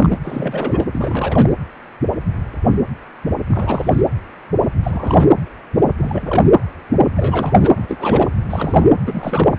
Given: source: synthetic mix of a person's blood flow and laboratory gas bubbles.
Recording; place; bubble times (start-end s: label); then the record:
Doppler ultrasound of blood flow; precordium
0.00-0.18 s: bubbles
0.23-0.86 s: bubbles
0.92-1.53 s: bubbles
3.48-4.01 s: bubbles
4.83-5.31 s: bubbles
5.97-6.51 s: bubbles
7.16-7.70 s: bubbles
7.76-8.29 s: bubbles
8.49-8.90 s: bubbles
9.05-9.57 s: bubbles
From the record:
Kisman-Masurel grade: 332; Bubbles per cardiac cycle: rolling drumbeat, 9 or more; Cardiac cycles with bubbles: 50 to 99%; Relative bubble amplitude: moderate (0.250 to 0.450); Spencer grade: 3 (all of the cardiac periods contain showers or single bubble signals, but not dominating or overriding the cardiac motion signals); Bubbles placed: anywhere in the cardiac cycle